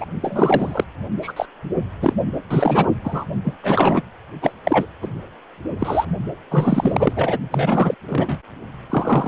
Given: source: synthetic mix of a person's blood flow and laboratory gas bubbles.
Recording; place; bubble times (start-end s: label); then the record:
Doppler ultrasound of blood flow; precordium
0.00-0.05 s: bubbles
0.21-0.84 s: bubbles
1.22-1.32 s: bubbles
1.36-1.46 s: bubbles
2.02-2.13 s: bubbles
2.50-2.88 s: bubbles
3.04-3.25 s: bubbles
3.44-3.57 s: bubbles
3.62-4.02 s: bubbles
4.42-4.52 s: bubbles
4.63-4.87 s: bubbles
5.02-5.08 s: bubbles
5.79-6.05 s: bubbles
6.50-7.13 s: bubbles
7.16-7.37 s: bubbles
7.51-7.95 s: bubbles
8.06-8.38 s: bubbles
8.89-9.28 s: bubbles
From the record:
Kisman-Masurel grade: 333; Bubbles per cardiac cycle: rolling drumbeat, 9 or more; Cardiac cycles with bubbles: 50 to 99%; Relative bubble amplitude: loud (0.450 to 0.775); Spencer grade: 3 (all of the cardiac periods contain showers or single bubble signals, but not dominating or overriding the cardiac motion signals); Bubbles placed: only in the low amplitude regions of the cardiac cycle